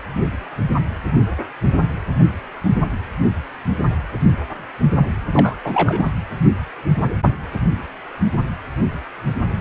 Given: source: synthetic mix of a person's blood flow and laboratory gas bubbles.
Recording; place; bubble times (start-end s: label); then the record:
Doppler ultrasound of blood flow; precordium
5.33-5.56 s: bubbles
5.64-6.12 s: bubbles
From the record:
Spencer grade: 2 (many but less than half of the cardiac periods contain bubble signals, singularly or in groups); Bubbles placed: anywhere in the cardiac cycle